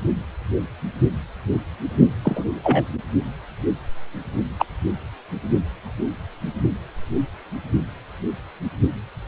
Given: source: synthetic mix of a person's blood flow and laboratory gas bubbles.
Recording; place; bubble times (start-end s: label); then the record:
Doppler ultrasound of blood flow; precordium
2.23-2.44 s: bubbles
2.62-2.84 s: bubbles
4.59-4.66 s: bubbles
From the record:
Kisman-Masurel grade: 123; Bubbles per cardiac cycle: 1 to 2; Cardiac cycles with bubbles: 10 to 50%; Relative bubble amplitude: loud (0.450 to 0.775); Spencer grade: 2 (many but less than half of the cardiac periods contain bubble signals, singularly or in groups); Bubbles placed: only in the low amplitude regions of the cardiac cycle